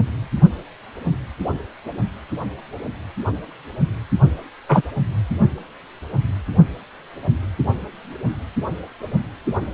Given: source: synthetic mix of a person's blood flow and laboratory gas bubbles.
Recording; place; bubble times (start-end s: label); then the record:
Doppler ultrasound of blood flow; precordium
4.69-4.82 s: bubbles
From the record:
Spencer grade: 2 (many but less than half of the cardiac periods contain bubble signals, singularly or in groups); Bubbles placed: only in the low amplitude regions of the cardiac cycle